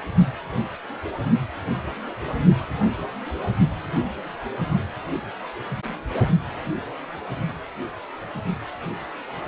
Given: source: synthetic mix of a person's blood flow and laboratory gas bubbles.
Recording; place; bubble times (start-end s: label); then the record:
Doppler ultrasound of blood flow; precordium
no bubbles
From the record:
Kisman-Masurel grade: 000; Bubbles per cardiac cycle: 0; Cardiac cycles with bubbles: 0%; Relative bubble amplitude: no bubbles discernible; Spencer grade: 0 (complete lack of bubble signals)